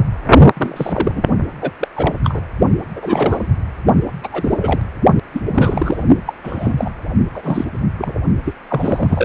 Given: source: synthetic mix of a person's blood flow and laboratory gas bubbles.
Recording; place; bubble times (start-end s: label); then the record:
Doppler ultrasound of blood flow; precordium
0.00-0.06 s: bubbles
0.56-1.21 s: bubbles
1.61-1.71 s: bubbles
1.79-1.88 s: bubbles
1.96-2.16 s: bubbles
2.24-2.40 s: bubbles
2.96-3.47 s: bubbles
4.24-4.29 s: bubbles
4.32-4.82 s: bubbles
5.32-5.42 s: bubbles
5.54-6.04 s: bubbles
6.26-6.33 s: bubbles
6.44-6.72 s: bubbles
6.77-6.91 s: bubbles
7.33-7.65 s: bubbles
7.99-8.18 s: bubbles
8.45-8.54 s: bubbles
8.68-9.25 s: bubbles
From the record:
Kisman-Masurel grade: 233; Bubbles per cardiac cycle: several, 3 to 8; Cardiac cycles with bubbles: 50 to 99%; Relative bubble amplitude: loud (0.450 to 0.775); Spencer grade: 3 (all of the cardiac periods contain showers or single bubble signals, but not dominating or overriding the cardiac motion signals); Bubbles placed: only in the low amplitude regions of the cardiac cycle